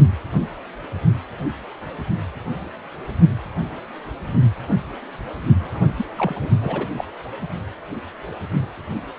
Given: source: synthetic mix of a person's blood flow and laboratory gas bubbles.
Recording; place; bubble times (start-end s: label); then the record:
Doppler ultrasound of blood flow; precordium
5.60-5.80 s: bubbles
5.97-6.05 s: bubbles
6.17-6.49 s: bubbles
6.62-6.88 s: bubbles
6.97-7.04 s: bubbles
From the record:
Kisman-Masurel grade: 211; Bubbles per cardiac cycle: several, 3 to 8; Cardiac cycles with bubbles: 1 to 10%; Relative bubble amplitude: barely perceptible (0.100 to 0.250); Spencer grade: 1 (occasional bubble signal discernible with the cardiac motion signal, with majority of cardiac periods free of bubbles); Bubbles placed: only in the low amplitude regions of the cardiac cycle